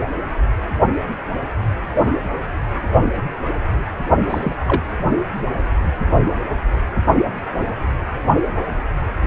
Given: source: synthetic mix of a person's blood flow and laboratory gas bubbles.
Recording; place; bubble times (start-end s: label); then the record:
Doppler ultrasound of blood flow; precordium
4.27-4.55 s: bubbles
4.67-4.82 s: bubbles
From the record:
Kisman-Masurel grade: 222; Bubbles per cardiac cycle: several, 3 to 8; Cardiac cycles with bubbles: 10 to 50%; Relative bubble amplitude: moderate (0.250 to 0.450); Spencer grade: 2 (many but less than half of the cardiac periods contain bubble signals, singularly or in groups); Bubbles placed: anywhere in the cardiac cycle